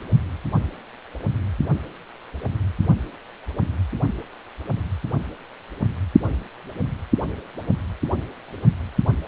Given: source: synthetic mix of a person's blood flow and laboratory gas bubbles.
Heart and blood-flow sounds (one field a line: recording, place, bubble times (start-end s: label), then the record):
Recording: Doppler ultrasound of blood flow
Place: precordium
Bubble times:
no bubbles
From the record:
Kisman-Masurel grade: 000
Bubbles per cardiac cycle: 0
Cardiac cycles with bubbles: 0%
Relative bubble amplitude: no bubbles discernible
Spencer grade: 0 (complete lack of bubble signals)